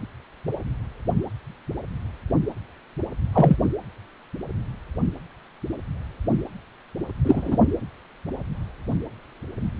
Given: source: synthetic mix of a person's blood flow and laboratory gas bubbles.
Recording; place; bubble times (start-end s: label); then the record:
Doppler ultrasound of blood flow; precordium
3.33-3.56 s: bubbles
7.25-7.59 s: bubbles
From the record:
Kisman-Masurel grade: 112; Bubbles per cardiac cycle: 1 to 2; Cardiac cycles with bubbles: 1 to 10%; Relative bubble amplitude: moderate (0.250 to 0.450); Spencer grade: 1 (occasional bubble signal discernible with the cardiac motion signal, with majority of cardiac periods free of bubbles); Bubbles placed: anywhere in the cardiac cycle